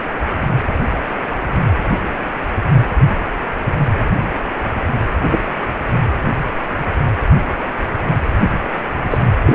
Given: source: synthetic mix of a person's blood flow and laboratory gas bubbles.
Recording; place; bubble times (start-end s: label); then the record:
Doppler ultrasound of blood flow; precordium
5.30-5.52 s: bubbles
9.10-9.18 s: bubbles
9.46-9.55 s: bubbles
From the record:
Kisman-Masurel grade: 123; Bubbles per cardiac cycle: 1 to 2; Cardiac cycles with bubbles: 10 to 50%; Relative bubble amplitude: loud (0.450 to 0.775); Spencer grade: 2 (many but less than half of the cardiac periods contain bubble signals, singularly or in groups); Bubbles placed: anywhere in the cardiac cycle